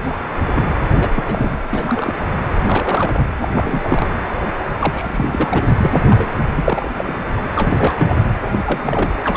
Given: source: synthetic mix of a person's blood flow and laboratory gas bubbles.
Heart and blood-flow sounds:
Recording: Doppler ultrasound of blood flow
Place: precordium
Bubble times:
0.03-0.19 s: bubbles
0.55-0.68 s: bubbles
0.97-1.09 s: bubbles
1.15-1.58 s: bubbles
1.68-2.13 s: bubbles
2.54-3.27 s: bubbles
3.39-3.48 s: bubbles
3.54-4.07 s: bubbles
4.80-5.66 s: bubbles
5.79-6.33 s: bubbles
6.55-6.91 s: bubbles
6.95-7.19 s: bubbles
7.55-7.94 s: bubbles
7.99-8.24 s: bubbles
8.38-9.13 s: bubbles
9.24-9.37 s: bubbles
From the record:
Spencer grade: 3 (all of the cardiac periods contain showers or single bubble signals, but not dominating or overriding the cardiac motion signals)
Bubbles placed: anywhere in the cardiac cycle

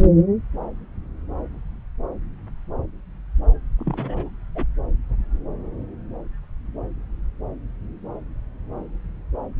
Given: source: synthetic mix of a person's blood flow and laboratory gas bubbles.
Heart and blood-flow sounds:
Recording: Doppler ultrasound of blood flow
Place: subclavian vein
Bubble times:
3.79-4.30 s: bubbles
4.55-4.65 s: bubbles
From the record:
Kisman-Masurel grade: 211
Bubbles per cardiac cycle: several, 3 to 8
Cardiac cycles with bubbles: 1 to 10%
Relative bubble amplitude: barely perceptible (0.100 to 0.250)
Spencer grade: 1 (occasional bubble signal discernible with the cardiac motion signal, with majority of cardiac periods free of bubbles)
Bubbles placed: anywhere in the cardiac cycle

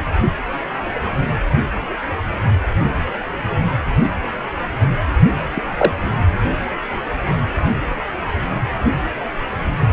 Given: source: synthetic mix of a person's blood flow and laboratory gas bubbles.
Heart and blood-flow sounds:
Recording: Doppler ultrasound of blood flow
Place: precordium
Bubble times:
5.56-5.61 s: bubbles
5.78-5.92 s: bubbles
From the record:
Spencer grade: 2 (many but less than half of the cardiac periods contain bubble signals, singularly or in groups)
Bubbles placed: anywhere in the cardiac cycle

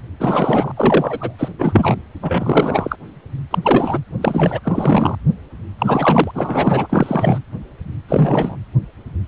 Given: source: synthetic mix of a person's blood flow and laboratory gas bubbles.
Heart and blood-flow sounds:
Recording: Doppler ultrasound of blood flow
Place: precordium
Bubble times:
0.20-0.72 s: bubbles
0.76-1.35 s: bubbles
1.38-1.49 s: bubbles
1.58-1.96 s: bubbles
2.22-2.96 s: bubbles
3.50-3.59 s: bubbles
3.63-3.99 s: bubbles
4.20-4.59 s: bubbles
4.63-5.15 s: bubbles
5.78-6.31 s: bubbles
6.34-7.38 s: bubbles
8.09-8.57 s: bubbles
From the record:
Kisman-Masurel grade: 333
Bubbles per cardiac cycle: rolling drumbeat, 9 or more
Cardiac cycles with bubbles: 50 to 99%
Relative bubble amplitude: loud (0.450 to 0.775)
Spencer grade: 3 (all of the cardiac periods contain showers or single bubble signals, but not dominating or overriding the cardiac motion signals)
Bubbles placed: anywhere in the cardiac cycle

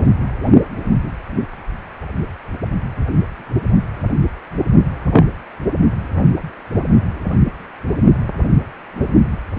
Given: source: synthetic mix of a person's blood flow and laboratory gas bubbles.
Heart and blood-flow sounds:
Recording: Doppler ultrasound of blood flow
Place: precordium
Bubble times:
5.12-5.25 s: bubbles
From the record:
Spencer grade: 1 (occasional bubble signal discernible with the cardiac motion signal, with majority of cardiac periods free of bubbles)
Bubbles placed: only in the low amplitude regions of the cardiac cycle

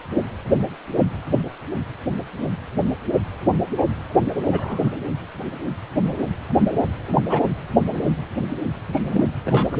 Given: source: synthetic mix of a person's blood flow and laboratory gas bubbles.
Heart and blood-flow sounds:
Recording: Doppler ultrasound of blood flow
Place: precordium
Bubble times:
3.78-3.83 s: bubbles
4.51-4.93 s: bubbles
7.26-7.49 s: bubbles
8.90-9.27 s: bubbles
9.45-9.77 s: bubbles
From the record:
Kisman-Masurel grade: 122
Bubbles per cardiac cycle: 1 to 2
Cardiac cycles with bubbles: 10 to 50%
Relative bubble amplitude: moderate (0.250 to 0.450)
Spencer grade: 2 (many but less than half of the cardiac periods contain bubble signals, singularly or in groups)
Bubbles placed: anywhere in the cardiac cycle

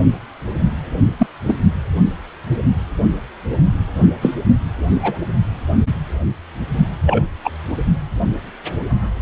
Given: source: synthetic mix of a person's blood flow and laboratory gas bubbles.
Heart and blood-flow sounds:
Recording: Doppler ultrasound of blood flow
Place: precordium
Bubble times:
1.19-1.27 s: bubbles
1.48-1.58 s: bubbles
4.21-4.35 s: bubbles
5.03-5.19 s: bubbles
7.06-7.24 s: bubbles
7.44-7.51 s: bubbles
From the record:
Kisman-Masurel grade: 123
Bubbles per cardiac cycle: 1 to 2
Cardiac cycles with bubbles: 10 to 50%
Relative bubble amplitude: loud (0.450 to 0.775)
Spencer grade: 2 (many but less than half of the cardiac periods contain bubble signals, singularly or in groups)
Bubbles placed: only in the low amplitude regions of the cardiac cycle

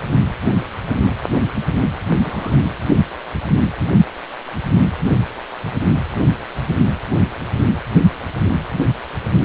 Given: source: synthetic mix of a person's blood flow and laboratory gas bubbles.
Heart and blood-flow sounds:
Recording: Doppler ultrasound of blood flow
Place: precordium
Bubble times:
2.24-2.58 s: bubbles
From the record:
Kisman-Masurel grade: 112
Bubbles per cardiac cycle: 1 to 2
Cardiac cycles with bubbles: 1 to 10%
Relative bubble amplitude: moderate (0.250 to 0.450)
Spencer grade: 1 (occasional bubble signal discernible with the cardiac motion signal, with majority of cardiac periods free of bubbles)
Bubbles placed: anywhere in the cardiac cycle

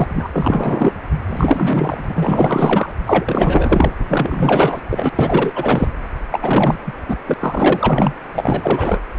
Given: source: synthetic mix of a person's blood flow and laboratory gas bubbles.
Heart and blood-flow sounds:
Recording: Doppler ultrasound of blood flow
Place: precordium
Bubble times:
0.00-0.27 s: bubbles
0.33-0.93 s: bubbles
1.27-2.92 s: bubbles
3.06-3.93 s: bubbles
4.08-4.80 s: bubbles
4.90-5.09 s: bubbles
5.15-5.53 s: bubbles
5.55-5.88 s: bubbles
6.31-6.78 s: bubbles
6.86-6.92 s: bubbles
7.08-7.17 s: bubbles
7.26-7.34 s: bubbles
7.39-8.13 s: bubbles
8.35-8.99 s: bubbles
From the record:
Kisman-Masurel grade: 444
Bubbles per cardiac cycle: continuous sound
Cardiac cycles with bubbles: 100%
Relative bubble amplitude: maximal (0.775 to 0.999)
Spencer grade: 4 (maximum detectable bubble signal sounding continuously throughout systole and diastole of every cardiac period, and overriding the amplitude of the normal cardiac signals)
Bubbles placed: anywhere in the cardiac cycle

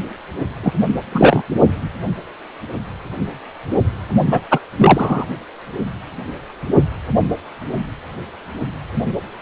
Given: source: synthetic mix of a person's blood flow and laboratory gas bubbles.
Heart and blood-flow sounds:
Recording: Doppler ultrasound of blood flow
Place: precordium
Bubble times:
0.62-0.71 s: bubbles
1.12-1.42 s: bubbles
4.31-4.40 s: bubbles
4.51-4.59 s: bubbles
4.77-5.25 s: bubbles
From the record:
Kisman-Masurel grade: 223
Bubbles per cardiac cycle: several, 3 to 8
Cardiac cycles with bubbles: 10 to 50%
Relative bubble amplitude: loud (0.450 to 0.775)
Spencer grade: 2 (many but less than half of the cardiac periods contain bubble signals, singularly or in groups)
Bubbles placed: only in the low amplitude regions of the cardiac cycle

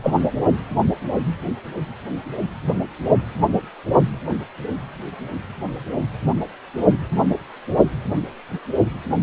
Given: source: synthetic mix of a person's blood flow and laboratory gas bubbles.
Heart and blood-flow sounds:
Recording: Doppler ultrasound of blood flow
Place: precordium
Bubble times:
0.03-0.14 s: bubbles
From the record:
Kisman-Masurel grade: 212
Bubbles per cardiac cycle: several, 3 to 8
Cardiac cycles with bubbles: 1 to 10%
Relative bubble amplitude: moderate (0.250 to 0.450)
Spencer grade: 1 (occasional bubble signal discernible with the cardiac motion signal, with majority of cardiac periods free of bubbles)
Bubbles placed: anywhere in the cardiac cycle

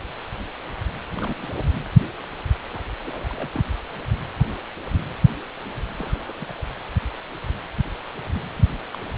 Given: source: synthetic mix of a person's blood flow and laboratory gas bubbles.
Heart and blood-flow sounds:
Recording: Doppler ultrasound of blood flow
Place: precordium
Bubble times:
1.11-1.34 s: bubbles
1.42-1.48 s: bubbles
1.56-1.60 s: bubbles
2.73-2.80 s: bubbles
3.04-3.50 s: bubbles
3.54-3.63 s: bubbles
5.97-6.54 s: bubbles
6.58-6.62 s: bubbles
8.56-8.71 s: bubbles
8.94-8.96 s: bubbles
9.14-9.18 s: bubbles
From the record:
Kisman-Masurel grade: 221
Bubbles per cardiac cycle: several, 3 to 8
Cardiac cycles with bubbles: 10 to 50%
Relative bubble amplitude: barely perceptible (0.100 to 0.250)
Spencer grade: 2 (many but less than half of the cardiac periods contain bubble signals, singularly or in groups)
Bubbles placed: anywhere in the cardiac cycle

